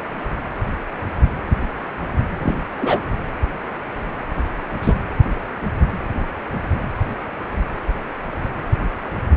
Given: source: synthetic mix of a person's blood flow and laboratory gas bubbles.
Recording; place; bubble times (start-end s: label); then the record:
Doppler ultrasound of blood flow; precordium
2.40-2.55 s: bubbles
2.80-3.00 s: bubbles
4.82-4.94 s: bubbles
From the record:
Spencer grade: 2 (many but less than half of the cardiac periods contain bubble signals, singularly or in groups); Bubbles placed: anywhere in the cardiac cycle